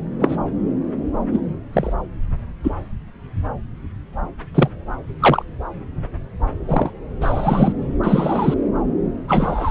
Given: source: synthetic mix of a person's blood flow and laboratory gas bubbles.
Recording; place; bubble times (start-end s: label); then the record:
Doppler ultrasound of blood flow; subclavian vein
0.19-0.36 s: bubbles
1.32-1.41 s: bubbles
1.73-1.93 s: bubbles
2.63-2.71 s: bubbles
4.54-4.70 s: bubbles
5.20-5.43 s: bubbles
6.67-6.91 s: bubbles
7.21-7.73 s: bubbles
8.03-8.54 s: bubbles
9.27-9.71 s: bubbles
From the record:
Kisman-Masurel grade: 123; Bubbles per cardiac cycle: 1 to 2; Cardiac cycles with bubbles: 10 to 50%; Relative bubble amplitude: loud (0.450 to 0.775); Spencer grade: 2 (many but less than half of the cardiac periods contain bubble signals, singularly or in groups); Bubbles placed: anywhere in the cardiac cycle